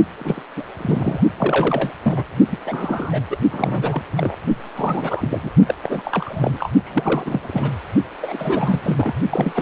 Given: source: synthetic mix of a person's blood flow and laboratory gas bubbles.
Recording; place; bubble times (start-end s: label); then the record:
Doppler ultrasound of blood flow; precordium
0.19-0.42 s: bubbles
0.56-0.65 s: bubbles
0.77-1.21 s: bubbles
1.36-1.92 s: bubbles
2.03-2.24 s: bubbles
2.49-2.58 s: bubbles
2.66-3.22 s: bubbles
3.30-3.39 s: bubbles
3.52-4.02 s: bubbles
4.17-4.36 s: bubbles
4.75-5.49 s: bubbles
5.67-5.75 s: bubbles
5.81-6.69 s: bubbles
6.84-7.70 s: bubbles
8.21-9.13 s: bubbles
9.29-9.62 s: bubbles
From the record:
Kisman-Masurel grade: 342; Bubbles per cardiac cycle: rolling drumbeat, 9 or more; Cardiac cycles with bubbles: 100%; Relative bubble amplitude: moderate (0.250 to 0.450); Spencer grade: 3 (all of the cardiac periods contain showers or single bubble signals, but not dominating or overriding the cardiac motion signals); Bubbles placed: only in the low amplitude regions of the cardiac cycle